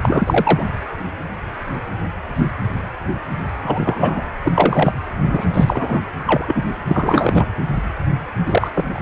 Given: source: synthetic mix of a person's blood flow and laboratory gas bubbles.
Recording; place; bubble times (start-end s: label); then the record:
Doppler ultrasound of blood flow; precordium
0.03-0.64 s: bubbles
3.62-4.23 s: bubbles
4.42-4.52 s: bubbles
4.55-4.92 s: bubbles
5.25-5.46 s: bubbles
5.54-6.00 s: bubbles
6.26-6.66 s: bubbles
6.89-7.46 s: bubbles
8.46-8.71 s: bubbles
8.74-9.02 s: bubbles
From the record:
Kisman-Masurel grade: 233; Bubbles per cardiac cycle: several, 3 to 8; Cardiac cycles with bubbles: 50 to 99%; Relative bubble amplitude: loud (0.450 to 0.775); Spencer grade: 3 (all of the cardiac periods contain showers or single bubble signals, but not dominating or overriding the cardiac motion signals); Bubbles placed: anywhere in the cardiac cycle